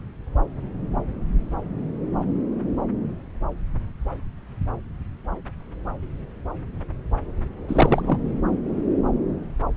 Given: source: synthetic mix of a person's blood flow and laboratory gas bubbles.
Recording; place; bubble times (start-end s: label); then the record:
Doppler ultrasound of blood flow; subclavian vein
7.68-8.18 s: bubbles
From the record:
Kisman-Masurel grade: 223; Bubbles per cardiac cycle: several, 3 to 8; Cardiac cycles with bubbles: 10 to 50%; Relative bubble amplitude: loud (0.450 to 0.775); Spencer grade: 2 (many but less than half of the cardiac periods contain bubble signals, singularly or in groups); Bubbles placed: anywhere in the cardiac cycle